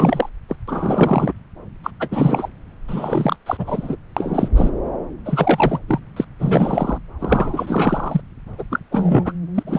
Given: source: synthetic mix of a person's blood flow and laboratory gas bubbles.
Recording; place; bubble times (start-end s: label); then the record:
Doppler ultrasound of blood flow; subclavian vein
0.00-0.29 s: bubbles
0.48-0.56 s: bubbles
0.68-1.32 s: bubbles
1.83-1.91 s: bubbles
2.00-2.08 s: bubbles
2.11-2.49 s: bubbles
2.88-3.36 s: bubbles
3.46-3.96 s: bubbles
4.17-4.48 s: bubbles
4.55-4.70 s: bubbles
5.25-5.79 s: bubbles
5.88-6.00 s: bubbles
6.16-6.25 s: bubbles
6.39-6.98 s: bubbles
7.20-8.21 s: bubbles
8.58-8.63 s: bubbles
8.71-8.79 s: bubbles
8.91-9.32 s: bubbles
9.54-9.63 s: bubbles
9.66-9.78 s: bubbles
From the record:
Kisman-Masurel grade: 343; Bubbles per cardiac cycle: rolling drumbeat, 9 or more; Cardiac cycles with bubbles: 100%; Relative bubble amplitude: loud (0.450 to 0.775); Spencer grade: 3 (all of the cardiac periods contain showers or single bubble signals, but not dominating or overriding the cardiac motion signals); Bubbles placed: anywhere in the cardiac cycle